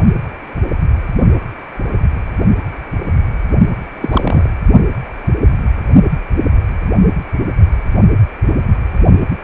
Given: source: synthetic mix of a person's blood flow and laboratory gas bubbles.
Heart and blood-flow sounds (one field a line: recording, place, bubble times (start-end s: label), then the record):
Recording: Doppler ultrasound of blood flow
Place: precordium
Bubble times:
4.02-4.48 s: bubbles
From the record:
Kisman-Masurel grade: 222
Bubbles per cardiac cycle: several, 3 to 8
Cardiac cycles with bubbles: 10 to 50%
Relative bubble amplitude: moderate (0.250 to 0.450)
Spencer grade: 2 (many but less than half of the cardiac periods contain bubble signals, singularly or in groups)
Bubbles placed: only in the low amplitude regions of the cardiac cycle